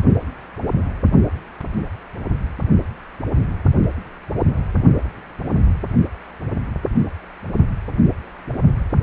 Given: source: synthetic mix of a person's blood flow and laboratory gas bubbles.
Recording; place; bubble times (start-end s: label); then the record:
Doppler ultrasound of blood flow; precordium
no bubbles
From the record:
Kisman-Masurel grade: 000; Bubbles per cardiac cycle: 0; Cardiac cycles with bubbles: 0%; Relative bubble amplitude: no bubbles discernible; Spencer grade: 0 (complete lack of bubble signals)